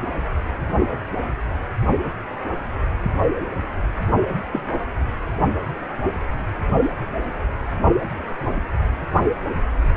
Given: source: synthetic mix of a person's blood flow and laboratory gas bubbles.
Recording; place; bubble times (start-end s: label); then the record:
Doppler ultrasound of blood flow; precordium
4.52-4.62 s: bubbles
From the record:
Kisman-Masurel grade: 112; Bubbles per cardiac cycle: 1 to 2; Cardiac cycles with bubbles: 1 to 10%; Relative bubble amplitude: moderate (0.250 to 0.450); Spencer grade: 1 (occasional bubble signal discernible with the cardiac motion signal, with majority of cardiac periods free of bubbles); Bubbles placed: only in the low amplitude regions of the cardiac cycle